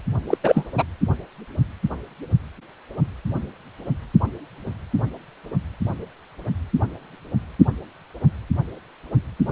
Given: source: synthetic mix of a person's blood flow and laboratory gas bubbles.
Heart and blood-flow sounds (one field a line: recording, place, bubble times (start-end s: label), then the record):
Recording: Doppler ultrasound of blood flow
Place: precordium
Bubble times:
0.28-0.38 s: bubbles
0.43-0.66 s: bubbles
0.78-0.84 s: bubbles
From the record:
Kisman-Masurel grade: 213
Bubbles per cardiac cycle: several, 3 to 8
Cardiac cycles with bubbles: 1 to 10%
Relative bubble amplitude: loud (0.450 to 0.775)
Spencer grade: 1 (occasional bubble signal discernible with the cardiac motion signal, with majority of cardiac periods free of bubbles)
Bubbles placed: only in the low amplitude regions of the cardiac cycle